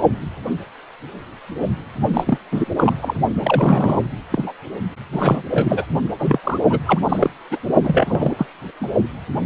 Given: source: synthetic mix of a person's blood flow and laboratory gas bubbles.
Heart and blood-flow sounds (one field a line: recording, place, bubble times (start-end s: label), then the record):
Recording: Doppler ultrasound of blood flow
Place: precordium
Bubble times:
2.13-2.24 s: bubbles
2.27-2.38 s: bubbles
2.52-3.14 s: bubbles
3.35-4.00 s: bubbles
4.30-4.53 s: bubbles
5.12-5.43 s: bubbles
5.50-5.85 s: bubbles
6.20-6.40 s: bubbles
6.44-6.59 s: bubbles
6.70-6.79 s: bubbles
6.86-6.99 s: bubbles
7.08-7.30 s: bubbles
7.51-7.58 s: bubbles
7.83-8.35 s: bubbles
8.38-8.46 s: bubbles
8.80-8.91 s: bubbles
From the record:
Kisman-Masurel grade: 333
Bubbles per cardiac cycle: rolling drumbeat, 9 or more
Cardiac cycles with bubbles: 50 to 99%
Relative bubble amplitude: loud (0.450 to 0.775)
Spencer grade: 3 (all of the cardiac periods contain showers or single bubble signals, but not dominating or overriding the cardiac motion signals)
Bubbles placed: only in the low amplitude regions of the cardiac cycle